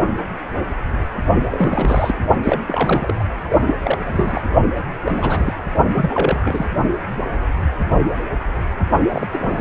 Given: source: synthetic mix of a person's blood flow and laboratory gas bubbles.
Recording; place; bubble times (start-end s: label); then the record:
Doppler ultrasound of blood flow; precordium
1.51-2.15 s: bubbles
2.44-2.60 s: bubbles
2.68-3.24 s: bubbles
3.67-3.73 s: bubbles
3.82-4.46 s: bubbles
5.04-5.54 s: bubbles
5.95-6.65 s: bubbles
9.13-9.27 s: bubbles
9.31-9.61 s: bubbles
From the record:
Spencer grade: 3 (all of the cardiac periods contain showers or single bubble signals, but not dominating or overriding the cardiac motion signals); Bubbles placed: only in the low amplitude regions of the cardiac cycle